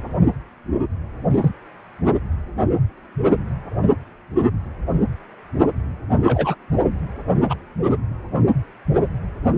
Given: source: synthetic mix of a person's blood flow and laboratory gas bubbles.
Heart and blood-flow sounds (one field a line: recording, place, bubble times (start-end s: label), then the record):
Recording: Doppler ultrasound of blood flow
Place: precordium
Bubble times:
1.30-1.48 s: bubbles
6.25-6.55 s: bubbles
7.49-7.54 s: bubbles
From the record:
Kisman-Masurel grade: 122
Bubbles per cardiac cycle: 1 to 2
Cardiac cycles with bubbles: 10 to 50%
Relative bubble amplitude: moderate (0.250 to 0.450)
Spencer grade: 2 (many but less than half of the cardiac periods contain bubble signals, singularly or in groups)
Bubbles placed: only in the low amplitude regions of the cardiac cycle